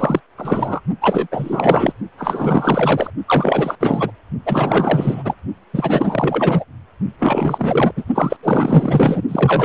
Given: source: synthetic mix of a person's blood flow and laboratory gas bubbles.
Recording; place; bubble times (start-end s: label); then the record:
Doppler ultrasound of blood flow; precordium
0.00-0.20 s: bubbles
0.38-0.80 s: bubbles
1.01-1.27 s: bubbles
1.31-1.93 s: bubbles
2.17-3.10 s: bubbles
3.27-3.75 s: bubbles
3.80-4.11 s: bubbles
4.46-5.34 s: bubbles
5.73-6.64 s: bubbles
7.19-7.91 s: bubbles
7.96-8.04 s: bubbles
8.15-8.37 s: bubbles
8.43-9.21 s: bubbles
9.29-9.65 s: bubbles
From the record:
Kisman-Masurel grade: 444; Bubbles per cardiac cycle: continuous sound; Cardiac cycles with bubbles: 100%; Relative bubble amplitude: maximal (0.775 to 0.999); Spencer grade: 4 (maximum detectable bubble signal sounding continuously throughout systole and diastole of every cardiac period, and overriding the amplitude of the normal cardiac signals); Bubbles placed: only in the low amplitude regions of the cardiac cycle